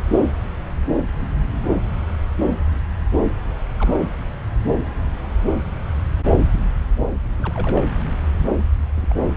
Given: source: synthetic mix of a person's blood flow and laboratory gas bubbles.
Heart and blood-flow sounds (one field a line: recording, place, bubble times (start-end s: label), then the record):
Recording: Doppler ultrasound of blood flow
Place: subclavian vein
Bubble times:
3.77-3.94 s: bubbles
7.38-7.86 s: bubbles
8.96-9.16 s: bubbles
From the record:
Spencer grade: 2 (many but less than half of the cardiac periods contain bubble signals, singularly or in groups)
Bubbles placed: anywhere in the cardiac cycle